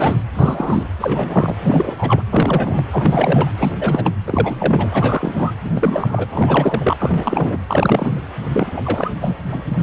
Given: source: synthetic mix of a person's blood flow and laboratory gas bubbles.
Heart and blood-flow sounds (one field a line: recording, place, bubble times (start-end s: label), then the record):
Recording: Doppler ultrasound of blood flow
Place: precordium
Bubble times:
0.00-0.20 s: bubbles
0.34-0.84 s: bubbles
1.00-1.56 s: bubbles
1.62-2.22 s: bubbles
2.31-2.81 s: bubbles
2.92-3.50 s: bubbles
3.57-3.71 s: bubbles
3.79-4.11 s: bubbles
4.27-4.89 s: bubbles
4.92-5.52 s: bubbles
5.65-5.71 s: bubbles
5.75-6.27 s: bubbles
6.31-7.58 s: bubbles
7.67-8.21 s: bubbles
8.52-8.72 s: bubbles
8.76-9.10 s: bubbles
9.21-9.34 s: bubbles
9.51-9.62 s: bubbles
9.65-9.83 s: bubbles
From the record:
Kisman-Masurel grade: 342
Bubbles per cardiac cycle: rolling drumbeat, 9 or more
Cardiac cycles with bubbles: 100%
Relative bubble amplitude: moderate (0.250 to 0.450)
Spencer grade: 3 (all of the cardiac periods contain showers or single bubble signals, but not dominating or overriding the cardiac motion signals)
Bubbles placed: anywhere in the cardiac cycle